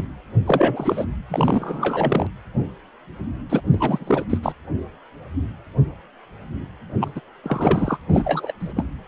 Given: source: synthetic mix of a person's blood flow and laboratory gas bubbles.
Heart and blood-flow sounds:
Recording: Doppler ultrasound of blood flow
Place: precordium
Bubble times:
0.00-0.04 s: bubbles
0.46-1.05 s: bubbles
1.28-2.27 s: bubbles
3.49-3.61 s: bubbles
3.72-4.25 s: bubbles
4.29-4.38 s: bubbles
4.42-4.52 s: bubbles
7.00-7.12 s: bubbles
7.15-7.21 s: bubbles
7.43-7.98 s: bubbles
8.09-8.52 s: bubbles
8.60-8.73 s: bubbles
8.76-8.84 s: bubbles
From the record:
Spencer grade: 3 (all of the cardiac periods contain showers or single bubble signals, but not dominating or overriding the cardiac motion signals)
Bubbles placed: anywhere in the cardiac cycle

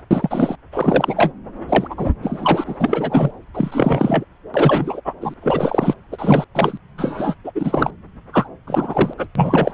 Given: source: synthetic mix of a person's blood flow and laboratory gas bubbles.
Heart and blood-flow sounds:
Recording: Doppler ultrasound of blood flow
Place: subclavian vein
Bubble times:
0.10-0.56 s: bubbles
0.72-1.32 s: bubbles
1.68-2.11 s: bubbles
2.23-3.31 s: bubbles
3.54-4.25 s: bubbles
4.54-5.01 s: bubbles
5.04-5.13 s: bubbles
5.21-5.34 s: bubbles
5.40-5.94 s: bubbles
6.11-6.44 s: bubbles
6.54-6.77 s: bubbles
6.97-7.34 s: bubbles
7.44-7.52 s: bubbles
7.55-7.91 s: bubbles
8.33-8.48 s: bubbles
8.67-9.13 s: bubbles
9.17-9.26 s: bubbles
9.35-9.71 s: bubbles
From the record:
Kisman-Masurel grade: 343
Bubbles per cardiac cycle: rolling drumbeat, 9 or more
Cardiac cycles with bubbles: 100%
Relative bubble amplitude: loud (0.450 to 0.775)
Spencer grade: 3 (all of the cardiac periods contain showers or single bubble signals, but not dominating or overriding the cardiac motion signals)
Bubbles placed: anywhere in the cardiac cycle

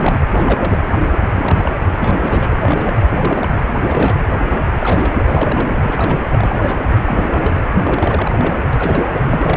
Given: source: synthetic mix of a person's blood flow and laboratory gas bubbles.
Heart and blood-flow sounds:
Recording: Doppler ultrasound of blood flow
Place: precordium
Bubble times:
0.00-0.25 s: bubbles
0.32-0.81 s: bubbles
1.34-1.73 s: bubbles
1.95-2.96 s: bubbles
3.10-3.51 s: bubbles
3.69-4.25 s: bubbles
4.46-4.62 s: bubbles
4.78-5.12 s: bubbles
5.18-5.69 s: bubbles
5.74-5.81 s: bubbles
5.83-6.17 s: bubbles
6.32-6.78 s: bubbles
7.00-7.64 s: bubbles
7.82-8.32 s: bubbles
8.38-8.61 s: bubbles
8.73-9.07 s: bubbles
9.12-9.57 s: bubbles
From the record:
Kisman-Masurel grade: 342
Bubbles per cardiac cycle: rolling drumbeat, 9 or more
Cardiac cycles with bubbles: 100%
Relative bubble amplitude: moderate (0.250 to 0.450)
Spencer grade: 3 (all of the cardiac periods contain showers or single bubble signals, but not dominating or overriding the cardiac motion signals)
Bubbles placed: anywhere in the cardiac cycle

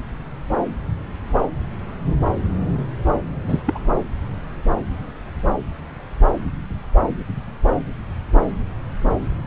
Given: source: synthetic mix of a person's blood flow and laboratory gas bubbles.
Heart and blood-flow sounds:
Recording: Doppler ultrasound of blood flow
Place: subclavian vein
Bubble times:
3.42-3.61 s: bubbles
3.66-3.78 s: bubbles
From the record:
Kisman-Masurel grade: 212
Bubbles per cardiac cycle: several, 3 to 8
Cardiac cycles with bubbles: 1 to 10%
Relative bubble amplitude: moderate (0.250 to 0.450)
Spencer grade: 1 (occasional bubble signal discernible with the cardiac motion signal, with majority of cardiac periods free of bubbles)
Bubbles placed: anywhere in the cardiac cycle

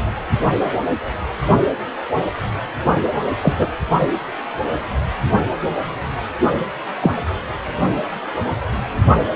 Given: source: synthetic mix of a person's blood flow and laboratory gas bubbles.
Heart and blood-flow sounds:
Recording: Doppler ultrasound of blood flow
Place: precordium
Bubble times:
3.41-3.53 s: bubbles
3.57-3.68 s: bubbles
7.01-7.12 s: bubbles
From the record:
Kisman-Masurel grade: 123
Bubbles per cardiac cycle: 1 to 2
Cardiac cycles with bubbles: 10 to 50%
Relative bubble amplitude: loud (0.450 to 0.775)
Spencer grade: 2 (many but less than half of the cardiac periods contain bubble signals, singularly or in groups)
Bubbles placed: only in the low amplitude regions of the cardiac cycle

